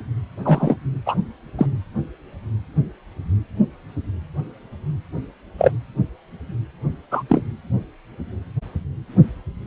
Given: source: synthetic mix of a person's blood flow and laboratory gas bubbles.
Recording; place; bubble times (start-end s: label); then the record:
Doppler ultrasound of blood flow; precordium
0.44-0.76 s: bubbles
1.06-1.16 s: bubbles
1.58-1.66 s: bubbles
5.58-5.71 s: bubbles
7.11-7.23 s: bubbles
7.29-7.42 s: bubbles
From the record:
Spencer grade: 2 (many but less than half of the cardiac periods contain bubble signals, singularly or in groups); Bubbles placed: anywhere in the cardiac cycle